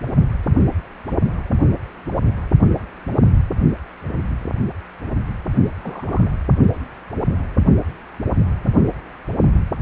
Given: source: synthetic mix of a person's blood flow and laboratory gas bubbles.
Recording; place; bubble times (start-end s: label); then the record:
Doppler ultrasound of blood flow; precordium
5.82-6.33 s: bubbles
From the record:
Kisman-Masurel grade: 111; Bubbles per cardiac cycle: 1 to 2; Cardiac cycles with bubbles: 1 to 10%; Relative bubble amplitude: barely perceptible (0.100 to 0.250); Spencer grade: 1 (occasional bubble signal discernible with the cardiac motion signal, with majority of cardiac periods free of bubbles); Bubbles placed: only in the low amplitude regions of the cardiac cycle